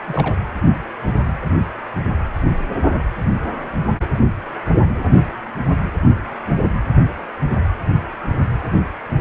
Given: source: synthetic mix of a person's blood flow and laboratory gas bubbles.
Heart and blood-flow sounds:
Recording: Doppler ultrasound of blood flow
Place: precordium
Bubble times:
0.08-0.39 s: bubbles
From the record:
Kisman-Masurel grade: 221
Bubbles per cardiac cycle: several, 3 to 8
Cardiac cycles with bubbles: 10 to 50%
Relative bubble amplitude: barely perceptible (0.100 to 0.250)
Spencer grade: 2 (many but less than half of the cardiac periods contain bubble signals, singularly or in groups)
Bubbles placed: anywhere in the cardiac cycle

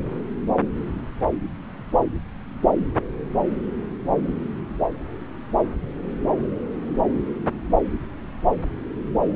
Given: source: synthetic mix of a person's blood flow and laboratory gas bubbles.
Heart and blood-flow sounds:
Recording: Doppler ultrasound of blood flow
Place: subclavian vein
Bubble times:
no bubbles
From the record:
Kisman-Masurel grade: 000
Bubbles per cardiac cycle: 0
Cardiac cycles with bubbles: 0%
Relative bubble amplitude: no bubbles discernible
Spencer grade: 0 (complete lack of bubble signals)

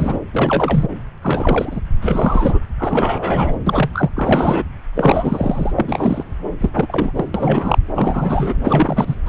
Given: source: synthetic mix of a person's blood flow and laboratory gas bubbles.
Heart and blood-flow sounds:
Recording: Doppler ultrasound of blood flow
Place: subclavian vein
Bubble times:
0.00-0.18 s: bubbles
0.33-0.91 s: bubbles
1.22-1.80 s: bubbles
2.02-2.59 s: bubbles
2.78-3.59 s: bubbles
3.66-3.89 s: bubbles
3.93-4.10 s: bubbles
4.16-4.63 s: bubbles
4.96-5.72 s: bubbles
5.78-6.24 s: bubbles
6.60-7.11 s: bubbles
7.16-7.25 s: bubbles
7.34-7.79 s: bubbles
7.95-8.53 s: bubbles
8.64-9.15 s: bubbles
9.26-9.29 s: bubbles
From the record:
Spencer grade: 3 (all of the cardiac periods contain showers or single bubble signals, but not dominating or overriding the cardiac motion signals)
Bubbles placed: anywhere in the cardiac cycle

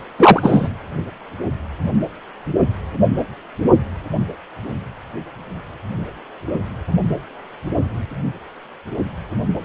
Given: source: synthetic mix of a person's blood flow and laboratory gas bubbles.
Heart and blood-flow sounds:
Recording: Doppler ultrasound of blood flow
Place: precordium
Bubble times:
0.18-0.69 s: bubbles
From the record:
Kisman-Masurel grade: 213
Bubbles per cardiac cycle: several, 3 to 8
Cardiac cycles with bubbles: 1 to 10%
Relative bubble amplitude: loud (0.450 to 0.775)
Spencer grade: 1 (occasional bubble signal discernible with the cardiac motion signal, with majority of cardiac periods free of bubbles)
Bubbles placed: only in the low amplitude regions of the cardiac cycle

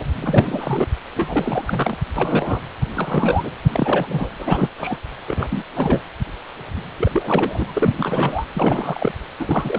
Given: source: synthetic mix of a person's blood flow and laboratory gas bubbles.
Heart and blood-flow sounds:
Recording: Doppler ultrasound of blood flow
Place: precordium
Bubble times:
0.21-0.87 s: bubbles
1.15-1.97 s: bubbles
2.16-2.60 s: bubbles
2.94-3.51 s: bubbles
3.63-4.29 s: bubbles
4.38-4.69 s: bubbles
4.77-4.98 s: bubbles
5.27-5.47 s: bubbles
5.50-5.65 s: bubbles
5.75-6.01 s: bubbles
6.98-7.95 s: bubbles
7.98-8.46 s: bubbles
8.54-9.14 s: bubbles
9.39-9.79 s: bubbles
From the record:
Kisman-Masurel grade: 332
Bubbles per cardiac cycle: rolling drumbeat, 9 or more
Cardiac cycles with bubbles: 50 to 99%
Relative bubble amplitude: moderate (0.250 to 0.450)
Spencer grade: 3 (all of the cardiac periods contain showers or single bubble signals, but not dominating or overriding the cardiac motion signals)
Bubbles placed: anywhere in the cardiac cycle

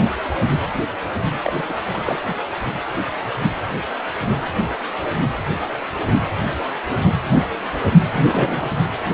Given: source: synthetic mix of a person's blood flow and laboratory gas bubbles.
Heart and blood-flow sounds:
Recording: Doppler ultrasound of blood flow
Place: precordium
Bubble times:
1.42-1.53 s: bubbles
1.68-1.73 s: bubbles
1.90-2.01 s: bubbles
2.06-2.17 s: bubbles
8.11-8.71 s: bubbles
From the record:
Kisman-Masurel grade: 222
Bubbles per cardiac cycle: several, 3 to 8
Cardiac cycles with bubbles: 10 to 50%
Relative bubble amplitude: moderate (0.250 to 0.450)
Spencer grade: 2 (many but less than half of the cardiac periods contain bubble signals, singularly or in groups)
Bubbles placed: anywhere in the cardiac cycle

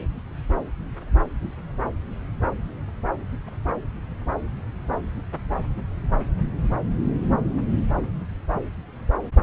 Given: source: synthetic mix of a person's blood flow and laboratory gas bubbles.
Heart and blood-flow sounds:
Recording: Doppler ultrasound of blood flow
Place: subclavian vein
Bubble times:
no bubbles
From the record:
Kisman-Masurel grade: 000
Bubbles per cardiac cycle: 0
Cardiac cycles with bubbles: 0%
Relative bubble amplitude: no bubbles discernible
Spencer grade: 0 (complete lack of bubble signals)

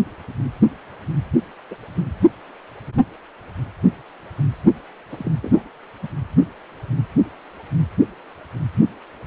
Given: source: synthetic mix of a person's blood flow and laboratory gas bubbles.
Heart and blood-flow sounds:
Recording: Doppler ultrasound of blood flow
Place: precordium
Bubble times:
1.70-1.75 s: bubbles
5.12-5.32 s: bubbles
5.42-5.62 s: bubbles
6.02-6.07 s: bubbles
From the record:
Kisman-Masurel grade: 122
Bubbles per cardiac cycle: 1 to 2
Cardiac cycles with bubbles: 10 to 50%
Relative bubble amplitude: moderate (0.250 to 0.450)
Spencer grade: 2 (many but less than half of the cardiac periods contain bubble signals, singularly or in groups)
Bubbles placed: anywhere in the cardiac cycle

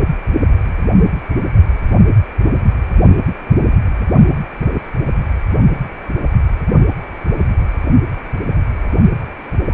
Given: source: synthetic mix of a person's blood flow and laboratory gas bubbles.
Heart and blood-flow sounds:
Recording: Doppler ultrasound of blood flow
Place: precordium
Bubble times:
9.70-9.74 s: bubbles
From the record:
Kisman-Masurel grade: 111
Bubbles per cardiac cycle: 1 to 2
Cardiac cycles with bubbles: 1 to 10%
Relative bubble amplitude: barely perceptible (0.100 to 0.250)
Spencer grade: 1 (occasional bubble signal discernible with the cardiac motion signal, with majority of cardiac periods free of bubbles)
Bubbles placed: only in the low amplitude regions of the cardiac cycle

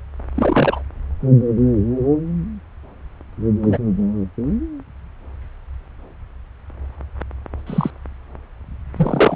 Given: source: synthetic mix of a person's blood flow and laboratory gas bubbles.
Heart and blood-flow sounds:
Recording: Doppler ultrasound of blood flow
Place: subclavian vein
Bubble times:
0.34-0.83 s: bubbles
3.62-3.78 s: bubbles
7.67-7.91 s: bubbles
8.96-9.36 s: bubbles
From the record:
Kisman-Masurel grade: 123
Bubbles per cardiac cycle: 1 to 2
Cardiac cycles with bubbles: 10 to 50%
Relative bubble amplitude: loud (0.450 to 0.775)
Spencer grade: 2 (many but less than half of the cardiac periods contain bubble signals, singularly or in groups)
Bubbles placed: anywhere in the cardiac cycle

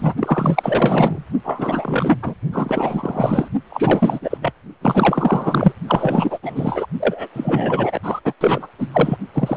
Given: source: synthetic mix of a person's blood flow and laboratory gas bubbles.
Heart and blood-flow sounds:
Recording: Doppler ultrasound of blood flow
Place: precordium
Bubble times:
0.00-0.14 s: bubbles
0.20-1.24 s: bubbles
1.43-2.19 s: bubbles
2.22-2.34 s: bubbles
2.52-3.49 s: bubbles
3.70-4.38 s: bubbles
4.41-4.53 s: bubbles
4.81-5.73 s: bubbles
5.87-6.38 s: bubbles
6.42-6.86 s: bubbles
7.00-7.28 s: bubbles
7.33-8.00 s: bubbles
8.03-8.21 s: bubbles
8.25-8.34 s: bubbles
8.40-8.68 s: bubbles
8.78-8.88 s: bubbles
8.93-9.17 s: bubbles
9.34-9.56 s: bubbles
From the record:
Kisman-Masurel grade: 444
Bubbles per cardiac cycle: continuous sound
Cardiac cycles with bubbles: 100%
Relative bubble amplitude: maximal (0.775 to 0.999)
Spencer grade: 4 (maximum detectable bubble signal sounding continuously throughout systole and diastole of every cardiac period, and overriding the amplitude of the normal cardiac signals)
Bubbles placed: only in the low amplitude regions of the cardiac cycle

